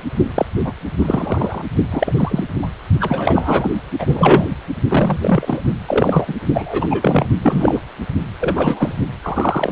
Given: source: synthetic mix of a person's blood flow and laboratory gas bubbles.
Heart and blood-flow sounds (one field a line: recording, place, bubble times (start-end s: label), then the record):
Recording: Doppler ultrasound of blood flow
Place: precordium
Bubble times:
0.34-0.46 s: bubbles
0.64-0.73 s: bubbles
0.99-1.61 s: bubbles
1.91-2.12 s: bubbles
2.15-2.44 s: bubbles
2.62-2.67 s: bubbles
3.00-3.71 s: bubbles
3.99-4.46 s: bubbles
4.88-5.19 s: bubbles
5.22-5.61 s: bubbles
5.86-6.34 s: bubbles
6.54-6.88 s: bubbles
6.90-7.26 s: bubbles
7.42-7.80 s: bubbles
8.40-8.96 s: bubbles
9.22-9.72 s: bubbles
From the record:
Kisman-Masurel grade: 243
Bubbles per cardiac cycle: several, 3 to 8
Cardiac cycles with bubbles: 100%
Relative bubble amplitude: loud (0.450 to 0.775)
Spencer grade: 3 (all of the cardiac periods contain showers or single bubble signals, but not dominating or overriding the cardiac motion signals)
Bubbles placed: only in the low amplitude regions of the cardiac cycle